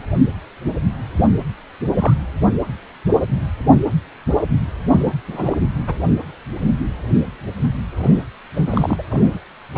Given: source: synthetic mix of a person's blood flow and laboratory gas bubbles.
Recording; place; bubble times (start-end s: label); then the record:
Doppler ultrasound of blood flow; precordium
1.16-1.26 s: bubbles
1.95-2.14 s: bubbles
4.90-5.12 s: bubbles
5.28-5.58 s: bubbles
5.87-5.94 s: bubbles
7.96-8.26 s: bubbles
8.55-9.02 s: bubbles
9.10-9.40 s: bubbles
9.75-9.78 s: bubbles
From the record:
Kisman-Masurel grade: 222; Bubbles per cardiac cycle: several, 3 to 8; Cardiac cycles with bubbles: 10 to 50%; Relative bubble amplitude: moderate (0.250 to 0.450); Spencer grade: 2 (many but less than half of the cardiac periods contain bubble signals, singularly or in groups); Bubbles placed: anywhere in the cardiac cycle